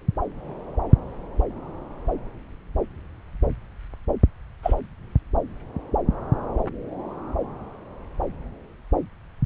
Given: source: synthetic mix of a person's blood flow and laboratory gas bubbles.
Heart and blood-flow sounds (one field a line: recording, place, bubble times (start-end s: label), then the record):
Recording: Doppler ultrasound of blood flow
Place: subclavian vein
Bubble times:
4.63-4.74 s: bubbles
From the record:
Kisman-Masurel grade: 112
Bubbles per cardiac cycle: 1 to 2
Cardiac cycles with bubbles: 1 to 10%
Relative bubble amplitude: moderate (0.250 to 0.450)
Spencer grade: 1 (occasional bubble signal discernible with the cardiac motion signal, with majority of cardiac periods free of bubbles)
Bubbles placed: anywhere in the cardiac cycle